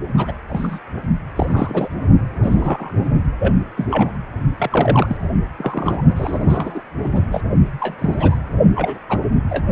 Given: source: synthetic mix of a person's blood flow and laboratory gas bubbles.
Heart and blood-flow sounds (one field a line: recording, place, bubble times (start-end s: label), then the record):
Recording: Doppler ultrasound of blood flow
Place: precordium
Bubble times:
0.17-0.34 s: bubbles
0.49-0.79 s: bubbles
1.36-1.89 s: bubbles
2.43-2.93 s: bubbles
3.39-3.54 s: bubbles
3.77-3.88 s: bubbles
3.90-4.12 s: bubbles
4.58-5.17 s: bubbles
5.58-6.03 s: bubbles
6.15-6.82 s: bubbles
7.00-7.24 s: bubbles
7.32-7.42 s: bubbles
7.80-7.96 s: bubbles
7.99-8.38 s: bubbles
8.75-8.99 s: bubbles
9.09-9.18 s: bubbles
9.49-9.64 s: bubbles
From the record:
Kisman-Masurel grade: 242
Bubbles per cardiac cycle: several, 3 to 8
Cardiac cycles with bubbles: 100%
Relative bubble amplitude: moderate (0.250 to 0.450)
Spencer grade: 3 (all of the cardiac periods contain showers or single bubble signals, but not dominating or overriding the cardiac motion signals)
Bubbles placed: only in the low amplitude regions of the cardiac cycle